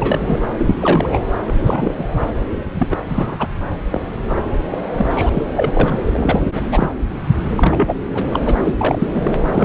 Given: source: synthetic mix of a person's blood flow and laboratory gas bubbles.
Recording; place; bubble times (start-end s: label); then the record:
Doppler ultrasound of blood flow; subclavian vein
0.00-0.40 s: bubbles
0.57-1.09 s: bubbles
1.11-1.19 s: bubbles
1.47-1.95 s: bubbles
1.98-2.04 s: bubbles
2.20-2.27 s: bubbles
2.79-2.88 s: bubbles
2.91-2.96 s: bubbles
3.09-3.48 s: bubbles
3.92-4.02 s: bubbles
4.28-4.41 s: bubbles
4.71-4.79 s: bubbles
4.96-5.29 s: bubbles
5.33-5.43 s: bubbles
5.57-6.00 s: bubbles
6.12-6.91 s: bubbles
7.56-7.95 s: bubbles
8.14-8.23 s: bubbles
8.33-8.39 s: bubbles
8.45-8.54 s: bubbles
8.63-8.73 s: bubbles
8.78-9.08 s: bubbles
9.14-9.36 s: bubbles
9.52-9.65 s: bubbles
From the record:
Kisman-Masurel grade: 342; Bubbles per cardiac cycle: rolling drumbeat, 9 or more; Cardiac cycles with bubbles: 100%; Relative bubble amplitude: moderate (0.250 to 0.450); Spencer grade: 3 (all of the cardiac periods contain showers or single bubble signals, but not dominating or overriding the cardiac motion signals); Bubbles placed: anywhere in the cardiac cycle